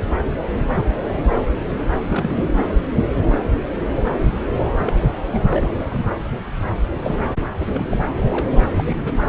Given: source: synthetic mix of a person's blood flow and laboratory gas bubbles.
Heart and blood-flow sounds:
Doppler ultrasound of blood flow; subclavian vein
2.00-2.49 s: bubbles
4.80-4.96 s: bubbles
5.32-5.46 s: bubbles
5.50-6.11 s: bubbles
7.03-7.19 s: bubbles
7.71-8.05 s: bubbles
8.28-8.48 s: bubbles
8.54-8.59 s: bubbles
8.75-9.14 s: bubbles
From the record:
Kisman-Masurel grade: 221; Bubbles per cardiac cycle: several, 3 to 8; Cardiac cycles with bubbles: 10 to 50%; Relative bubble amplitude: barely perceptible (0.100 to 0.250); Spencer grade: 2 (many but less than half of the cardiac periods contain bubble signals, singularly or in groups); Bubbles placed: anywhere in the cardiac cycle

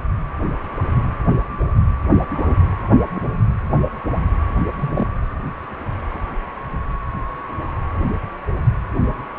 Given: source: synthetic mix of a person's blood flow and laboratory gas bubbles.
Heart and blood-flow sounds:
Doppler ultrasound of blood flow; precordium
2.29-2.58 s: bubbles
3.14-3.20 s: bubbles
4.79-5.08 s: bubbles
From the record:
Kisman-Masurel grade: 122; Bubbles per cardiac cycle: 1 to 2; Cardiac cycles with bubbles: 10 to 50%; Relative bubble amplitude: moderate (0.250 to 0.450); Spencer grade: 2 (many but less than half of the cardiac periods contain bubble signals, singularly or in groups); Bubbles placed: anywhere in the cardiac cycle

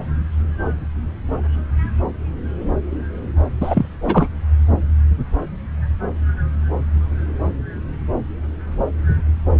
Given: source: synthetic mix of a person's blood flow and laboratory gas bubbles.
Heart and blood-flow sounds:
Doppler ultrasound of blood flow; subclavian vein
3.60-3.85 s: bubbles
4.01-4.29 s: bubbles
From the record:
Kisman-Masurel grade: 223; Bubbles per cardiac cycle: several, 3 to 8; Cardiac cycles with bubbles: 10 to 50%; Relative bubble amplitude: loud (0.450 to 0.775); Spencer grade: 2 (many but less than half of the cardiac periods contain bubble signals, singularly or in groups); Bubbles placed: anywhere in the cardiac cycle

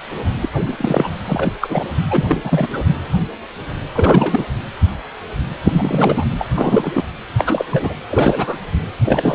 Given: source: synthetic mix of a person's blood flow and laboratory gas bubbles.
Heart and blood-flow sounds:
Doppler ultrasound of blood flow; precordium
0.41-0.49 s: bubbles
0.52-1.08 s: bubbles
1.25-1.54 s: bubbles
1.61-1.84 s: bubbles
2.10-2.25 s: bubbles
2.28-2.68 s: bubbles
2.73-2.79 s: bubbles
3.94-4.46 s: bubbles
5.64-6.25 s: bubbles
6.38-6.48 s: bubbles
6.53-7.03 s: bubbles
7.37-7.94 s: bubbles
8.10-8.58 s: bubbles
9.04-9.35 s: bubbles
From the record:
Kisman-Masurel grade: 333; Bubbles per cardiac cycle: rolling drumbeat, 9 or more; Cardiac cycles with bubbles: 50 to 99%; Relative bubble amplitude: loud (0.450 to 0.775); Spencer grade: 3 (all of the cardiac periods contain showers or single bubble signals, but not dominating or overriding the cardiac motion signals); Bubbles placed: anywhere in the cardiac cycle

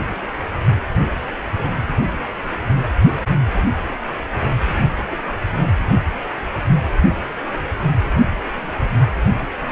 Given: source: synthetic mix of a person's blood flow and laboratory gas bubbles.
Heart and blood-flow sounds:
Doppler ultrasound of blood flow; precordium
5.11-5.17 s: bubbles
From the record:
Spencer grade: 1 (occasional bubble signal discernible with the cardiac motion signal, with majority of cardiac periods free of bubbles); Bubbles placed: only in the low amplitude regions of the cardiac cycle

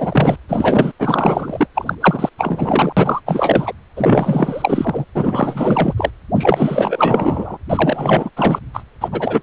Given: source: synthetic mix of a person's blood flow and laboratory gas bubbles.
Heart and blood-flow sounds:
Doppler ultrasound of blood flow; precordium
0.00-0.38 s: bubbles
0.48-0.92 s: bubbles
0.98-1.67 s: bubbles
1.75-1.95 s: bubbles
2.00-2.29 s: bubbles
2.38-2.92 s: bubbles
2.96-3.21 s: bubbles
3.26-3.73 s: bubbles
3.96-5.04 s: bubbles
5.15-5.94 s: bubbles
5.97-6.11 s: bubbles
6.35-7.58 s: bubbles
7.69-8.29 s: bubbles
8.36-8.59 s: bubbles
8.73-8.83 s: bubbles
9.01-9.08 s: bubbles
9.12-9.42 s: bubbles
From the record:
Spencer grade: 4 (maximum detectable bubble signal sounding continuously throughout systole and diastole of every cardiac period, and overriding the amplitude of the normal cardiac signals); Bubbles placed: anywhere in the cardiac cycle

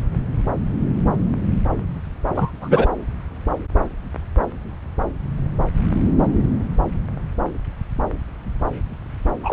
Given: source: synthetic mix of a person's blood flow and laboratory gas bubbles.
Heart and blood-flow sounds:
Doppler ultrasound of blood flow; subclavian vein
2.35-2.52 s: bubbles
2.61-2.88 s: bubbles
9.43-9.53 s: bubbles
From the record:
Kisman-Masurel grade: 223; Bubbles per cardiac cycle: several, 3 to 8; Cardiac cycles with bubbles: 10 to 50%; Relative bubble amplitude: loud (0.450 to 0.775); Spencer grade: 2 (many but less than half of the cardiac periods contain bubble signals, singularly or in groups); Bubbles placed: anywhere in the cardiac cycle

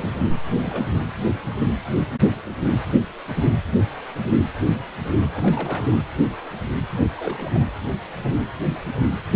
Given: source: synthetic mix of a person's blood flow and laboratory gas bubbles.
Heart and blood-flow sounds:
Doppler ultrasound of blood flow; precordium
0.00-0.11 s: bubbles
0.47-0.88 s: bubbles
5.34-5.96 s: bubbles
6.95-7.04 s: bubbles
7.17-7.59 s: bubbles
From the record:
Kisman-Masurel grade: 221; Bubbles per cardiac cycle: several, 3 to 8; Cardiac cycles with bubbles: 10 to 50%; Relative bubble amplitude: barely perceptible (0.100 to 0.250); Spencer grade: 2 (many but less than half of the cardiac periods contain bubble signals, singularly or in groups); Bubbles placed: anywhere in the cardiac cycle

